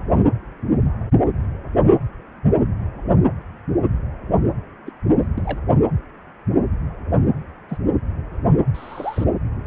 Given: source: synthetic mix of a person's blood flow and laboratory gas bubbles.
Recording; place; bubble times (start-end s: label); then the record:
Doppler ultrasound of blood flow; precordium
4.87-4.91 s: bubbles
5.20-5.28 s: bubbles
5.38-5.58 s: bubbles
7.69-7.78 s: bubbles
8.74-9.24 s: bubbles
From the record:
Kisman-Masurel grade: 121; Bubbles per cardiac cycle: 1 to 2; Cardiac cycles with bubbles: 10 to 50%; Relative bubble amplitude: barely perceptible (0.100 to 0.250); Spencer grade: 2 (many but less than half of the cardiac periods contain bubble signals, singularly or in groups); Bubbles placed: anywhere in the cardiac cycle